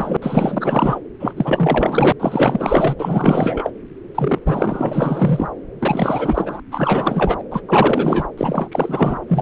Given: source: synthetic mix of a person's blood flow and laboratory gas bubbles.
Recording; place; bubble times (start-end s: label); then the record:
Doppler ultrasound of blood flow; subclavian vein
0.00-0.17 s: bubbles
0.21-0.99 s: bubbles
1.19-1.33 s: bubbles
1.37-2.12 s: bubbles
2.19-2.96 s: bubbles
2.98-3.70 s: bubbles
4.15-4.39 s: bubbles
4.46-5.50 s: bubbles
5.79-6.60 s: bubbles
6.71-7.43 s: bubbles
7.51-7.62 s: bubbles
7.68-8.28 s: bubbles
8.37-8.69 s: bubbles
8.71-9.20 s: bubbles
9.28-9.42 s: bubbles
From the record:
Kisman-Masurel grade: 444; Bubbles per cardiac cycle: continuous sound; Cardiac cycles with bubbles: 100%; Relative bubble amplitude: maximal (0.775 to 0.999); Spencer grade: 4 (maximum detectable bubble signal sounding continuously throughout systole and diastole of every cardiac period, and overriding the amplitude of the normal cardiac signals); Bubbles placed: anywhere in the cardiac cycle